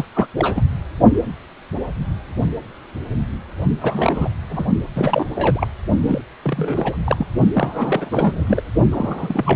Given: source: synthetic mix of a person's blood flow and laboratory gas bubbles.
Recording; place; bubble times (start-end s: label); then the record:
Doppler ultrasound of blood flow; precordium
0.00-0.05 s: bubbles
0.14-0.27 s: bubbles
0.36-0.62 s: bubbles
3.81-4.30 s: bubbles
4.49-4.68 s: bubbles
4.96-5.25 s: bubbles
5.34-5.67 s: bubbles
6.00-6.21 s: bubbles
6.42-6.97 s: bubbles
7.04-7.27 s: bubbles
7.53-8.61 s: bubbles
8.91-9.56 s: bubbles
From the record:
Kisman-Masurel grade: 332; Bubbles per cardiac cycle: rolling drumbeat, 9 or more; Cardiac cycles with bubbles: 50 to 99%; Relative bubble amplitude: moderate (0.250 to 0.450); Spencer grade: 3 (all of the cardiac periods contain showers or single bubble signals, but not dominating or overriding the cardiac motion signals); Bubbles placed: only in the low amplitude regions of the cardiac cycle